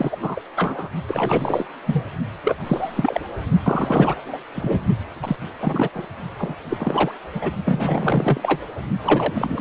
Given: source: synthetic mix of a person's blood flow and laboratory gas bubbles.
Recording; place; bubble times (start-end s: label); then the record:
Doppler ultrasound of blood flow; precordium
0.00-0.17 s: bubbles
0.22-0.41 s: bubbles
0.56-0.90 s: bubbles
1.08-1.67 s: bubbles
1.85-2.05 s: bubbles
2.44-2.55 s: bubbles
2.64-3.21 s: bubbles
3.63-4.14 s: bubbles
4.25-4.37 s: bubbles
4.54-4.80 s: bubbles
5.22-5.36 s: bubbles
5.60-5.89 s: bubbles
5.95-6.08 s: bubbles
6.39-6.55 s: bubbles
6.70-7.12 s: bubbles
7.34-7.56 s: bubbles
7.66-8.62 s: bubbles
9.02-9.61 s: bubbles
From the record:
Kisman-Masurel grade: 332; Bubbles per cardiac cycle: rolling drumbeat, 9 or more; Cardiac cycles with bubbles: 50 to 99%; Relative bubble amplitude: moderate (0.250 to 0.450); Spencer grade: 3 (all of the cardiac periods contain showers or single bubble signals, but not dominating or overriding the cardiac motion signals); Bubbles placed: only in the low amplitude regions of the cardiac cycle